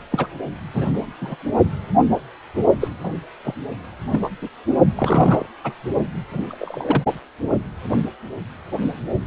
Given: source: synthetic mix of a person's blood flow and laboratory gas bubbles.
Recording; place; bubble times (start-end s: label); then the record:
Doppler ultrasound of blood flow; precordium
0.10-0.27 s: bubbles
0.73-1.06 s: bubbles
1.21-1.35 s: bubbles
2.80-2.88 s: bubbles
3.04-3.12 s: bubbles
3.43-3.54 s: bubbles
4.11-4.29 s: bubbles
4.42-4.49 s: bubbles
4.96-5.46 s: bubbles
5.63-5.73 s: bubbles
6.32-6.46 s: bubbles
6.49-7.03 s: bubbles
From the record:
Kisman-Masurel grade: 222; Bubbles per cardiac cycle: several, 3 to 8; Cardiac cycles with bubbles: 10 to 50%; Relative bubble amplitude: moderate (0.250 to 0.450); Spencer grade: 2 (many but less than half of the cardiac periods contain bubble signals, singularly or in groups); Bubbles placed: only in the low amplitude regions of the cardiac cycle